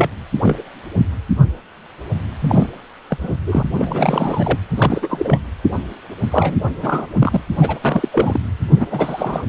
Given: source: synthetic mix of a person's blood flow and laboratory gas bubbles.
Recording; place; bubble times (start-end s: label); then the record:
Doppler ultrasound of blood flow; precordium
0.00-0.09 s: bubbles
0.42-0.57 s: bubbles
2.40-2.67 s: bubbles
3.10-3.17 s: bubbles
3.21-3.37 s: bubbles
3.46-3.63 s: bubbles
3.76-4.60 s: bubbles
4.76-5.39 s: bubbles
6.17-6.60 s: bubbles
6.82-7.06 s: bubbles
7.14-7.40 s: bubbles
7.58-7.79 s: bubbles
7.84-8.08 s: bubbles
8.12-8.40 s: bubbles
8.76-8.88 s: bubbles
8.90-9.46 s: bubbles
From the record:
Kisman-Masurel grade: 332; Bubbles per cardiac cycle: rolling drumbeat, 9 or more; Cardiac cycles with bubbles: 50 to 99%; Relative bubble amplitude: moderate (0.250 to 0.450); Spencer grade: 3 (all of the cardiac periods contain showers or single bubble signals, but not dominating or overriding the cardiac motion signals); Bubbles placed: anywhere in the cardiac cycle